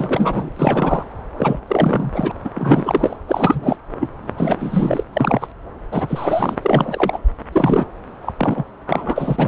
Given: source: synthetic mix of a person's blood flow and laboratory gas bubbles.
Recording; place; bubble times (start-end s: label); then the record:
Doppler ultrasound of blood flow; subclavian vein
0.00-1.05 s: bubbles
1.38-1.59 s: bubbles
1.67-2.32 s: bubbles
2.44-2.50 s: bubbles
2.55-3.17 s: bubbles
3.28-3.76 s: bubbles
4.00-4.09 s: bubbles
4.37-5.04 s: bubbles
5.12-5.48 s: bubbles
5.91-6.55 s: bubbles
6.62-7.19 s: bubbles
7.52-7.85 s: bubbles
8.21-8.33 s: bubbles
8.38-8.64 s: bubbles
8.87-9.47 s: bubbles
From the record:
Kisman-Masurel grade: 343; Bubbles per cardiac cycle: rolling drumbeat, 9 or more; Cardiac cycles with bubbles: 100%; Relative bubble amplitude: loud (0.450 to 0.775); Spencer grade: 3 (all of the cardiac periods contain showers or single bubble signals, but not dominating or overriding the cardiac motion signals); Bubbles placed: anywhere in the cardiac cycle